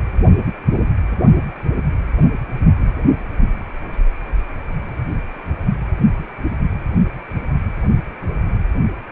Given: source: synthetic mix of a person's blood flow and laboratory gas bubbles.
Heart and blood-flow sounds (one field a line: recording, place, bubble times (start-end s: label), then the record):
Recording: Doppler ultrasound of blood flow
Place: precordium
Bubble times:
no bubbles
From the record:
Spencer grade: 0 (complete lack of bubble signals)